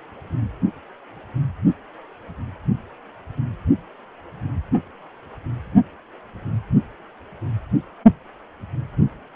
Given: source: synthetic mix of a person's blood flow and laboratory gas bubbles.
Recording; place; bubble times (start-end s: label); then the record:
Doppler ultrasound of blood flow; precordium
no bubbles
From the record:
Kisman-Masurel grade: 000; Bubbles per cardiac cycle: 0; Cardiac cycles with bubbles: 0%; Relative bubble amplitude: no bubbles discernible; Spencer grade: 0 (complete lack of bubble signals)